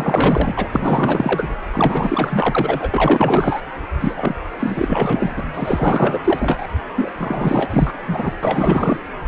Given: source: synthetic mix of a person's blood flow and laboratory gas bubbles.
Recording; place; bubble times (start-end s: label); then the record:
Doppler ultrasound of blood flow; precordium
0.00-0.69 s: bubbles
0.74-1.57 s: bubbles
1.72-2.91 s: bubbles
2.93-3.60 s: bubbles
3.99-4.35 s: bubbles
4.59-5.41 s: bubbles
5.54-6.20 s: bubbles
6.24-6.67 s: bubbles
6.96-7.11 s: bubbles
7.18-7.94 s: bubbles
8.07-8.32 s: bubbles
8.42-8.97 s: bubbles
9.26-9.28 s: bubbles
From the record:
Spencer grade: 4 (maximum detectable bubble signal sounding continuously throughout systole and diastole of every cardiac period, and overriding the amplitude of the normal cardiac signals); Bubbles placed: anywhere in the cardiac cycle